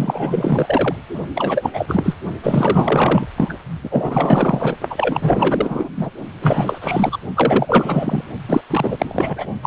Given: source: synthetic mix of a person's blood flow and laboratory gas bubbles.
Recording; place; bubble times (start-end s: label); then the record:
Doppler ultrasound of blood flow; precordium
0.00-0.96 s: bubbles
1.34-1.71 s: bubbles
1.74-2.16 s: bubbles
2.43-3.27 s: bubbles
3.37-3.57 s: bubbles
3.83-4.77 s: bubbles
4.89-5.89 s: bubbles
5.97-6.10 s: bubbles
6.40-6.78 s: bubbles
6.81-7.18 s: bubbles
7.36-8.24 s: bubbles
8.48-8.62 s: bubbles
8.70-9.46 s: bubbles
9.62-9.67 s: bubbles
From the record:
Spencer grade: 4 (maximum detectable bubble signal sounding continuously throughout systole and diastole of every cardiac period, and overriding the amplitude of the normal cardiac signals); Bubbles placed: only in the low amplitude regions of the cardiac cycle